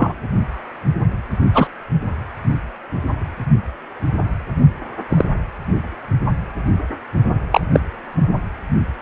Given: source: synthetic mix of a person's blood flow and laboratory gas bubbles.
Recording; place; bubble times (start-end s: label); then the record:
Doppler ultrasound of blood flow; precordium
0.00-0.13 s: bubbles
1.54-1.67 s: bubbles
5.11-5.24 s: bubbles
7.52-7.61 s: bubbles
7.72-7.80 s: bubbles
From the record:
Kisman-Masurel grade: 123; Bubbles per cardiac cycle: 1 to 2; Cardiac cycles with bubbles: 10 to 50%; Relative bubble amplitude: loud (0.450 to 0.775); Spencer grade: 2 (many but less than half of the cardiac periods contain bubble signals, singularly or in groups); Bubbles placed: only in the low amplitude regions of the cardiac cycle